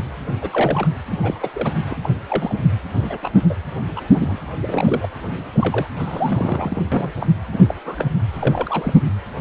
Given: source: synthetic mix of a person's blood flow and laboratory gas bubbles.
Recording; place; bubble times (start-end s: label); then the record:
Doppler ultrasound of blood flow; precordium
0.37-0.88 s: bubbles
1.10-1.18 s: bubbles
1.23-1.49 s: bubbles
1.53-1.73 s: bubbles
1.90-1.95 s: bubbles
2.02-2.10 s: bubbles
2.29-2.54 s: bubbles
2.93-3.17 s: bubbles
3.22-3.31 s: bubbles
3.34-3.42 s: bubbles
3.50-3.55 s: bubbles
3.96-4.02 s: bubbles
4.11-4.38 s: bubbles
4.61-5.09 s: bubbles
5.53-5.87 s: bubbles
5.96-6.82 s: bubbles
6.92-7.12 s: bubbles
7.20-7.27 s: bubbles
7.52-7.65 s: bubbles
7.69-7.75 s: bubbles
7.86-8.08 s: bubbles
8.33-8.94 s: bubbles
From the record:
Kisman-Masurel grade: 242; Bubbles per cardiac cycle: several, 3 to 8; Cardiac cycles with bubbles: 100%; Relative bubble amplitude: moderate (0.250 to 0.450); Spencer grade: 3 (all of the cardiac periods contain showers or single bubble signals, but not dominating or overriding the cardiac motion signals); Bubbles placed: anywhere in the cardiac cycle